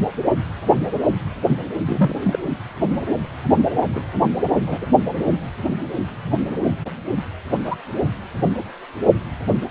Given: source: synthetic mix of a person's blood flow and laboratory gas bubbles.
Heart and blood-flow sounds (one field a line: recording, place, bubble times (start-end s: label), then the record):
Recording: Doppler ultrasound of blood flow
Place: precordium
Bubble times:
1.86-2.38 s: bubbles
3.94-4.04 s: bubbles
4.66-4.79 s: bubbles
4.82-4.86 s: bubbles
7.63-7.75 s: bubbles
From the record:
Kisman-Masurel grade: 122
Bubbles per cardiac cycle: 1 to 2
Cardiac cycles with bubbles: 10 to 50%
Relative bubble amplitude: moderate (0.250 to 0.450)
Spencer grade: 2 (many but less than half of the cardiac periods contain bubble signals, singularly or in groups)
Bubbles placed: anywhere in the cardiac cycle